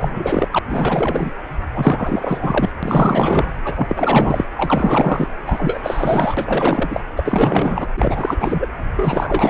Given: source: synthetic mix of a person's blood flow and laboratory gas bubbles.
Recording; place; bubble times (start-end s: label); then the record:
Doppler ultrasound of blood flow; precordium
0.00-0.48 s: bubbles
0.52-0.59 s: bubbles
0.70-1.34 s: bubbles
1.74-2.70 s: bubbles
2.83-3.52 s: bubbles
3.64-4.45 s: bubbles
4.57-5.28 s: bubbles
5.46-7.00 s: bubbles
7.16-7.90 s: bubbles
7.96-8.66 s: bubbles
8.96-9.50 s: bubbles
From the record:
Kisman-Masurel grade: 444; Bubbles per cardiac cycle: continuous sound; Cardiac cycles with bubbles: 100%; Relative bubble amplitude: maximal (0.775 to 0.999); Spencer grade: 4 (maximum detectable bubble signal sounding continuously throughout systole and diastole of every cardiac period, and overriding the amplitude of the normal cardiac signals); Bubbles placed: anywhere in the cardiac cycle